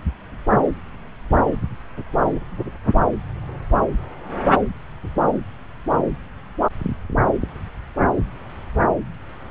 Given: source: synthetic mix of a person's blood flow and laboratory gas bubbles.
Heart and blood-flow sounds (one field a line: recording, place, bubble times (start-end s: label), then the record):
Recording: Doppler ultrasound of blood flow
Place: subclavian vein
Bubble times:
no bubbles
From the record:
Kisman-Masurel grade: 000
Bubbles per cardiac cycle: 0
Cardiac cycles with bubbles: 0%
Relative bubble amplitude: no bubbles discernible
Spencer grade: 0 (complete lack of bubble signals)